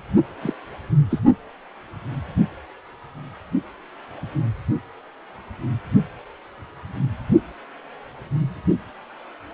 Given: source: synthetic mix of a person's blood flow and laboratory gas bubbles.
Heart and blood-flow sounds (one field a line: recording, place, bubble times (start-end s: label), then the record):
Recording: Doppler ultrasound of blood flow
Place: precordium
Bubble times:
0.41-0.53 s: bubbles
1.10-1.19 s: bubbles
From the record:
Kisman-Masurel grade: 112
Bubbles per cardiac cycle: 1 to 2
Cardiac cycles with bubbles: 1 to 10%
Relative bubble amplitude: moderate (0.250 to 0.450)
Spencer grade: 1 (occasional bubble signal discernible with the cardiac motion signal, with majority of cardiac periods free of bubbles)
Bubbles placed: only in the low amplitude regions of the cardiac cycle